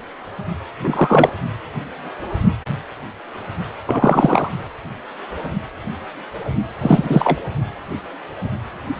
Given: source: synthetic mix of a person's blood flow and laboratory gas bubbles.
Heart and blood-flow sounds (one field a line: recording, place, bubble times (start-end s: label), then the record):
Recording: Doppler ultrasound of blood flow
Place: precordium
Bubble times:
0.80-1.30 s: bubbles
3.86-4.49 s: bubbles
6.80-7.40 s: bubbles
From the record:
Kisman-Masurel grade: 223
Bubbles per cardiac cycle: several, 3 to 8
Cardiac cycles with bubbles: 10 to 50%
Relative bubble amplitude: loud (0.450 to 0.775)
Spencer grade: 2 (many but less than half of the cardiac periods contain bubble signals, singularly or in groups)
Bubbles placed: only in the low amplitude regions of the cardiac cycle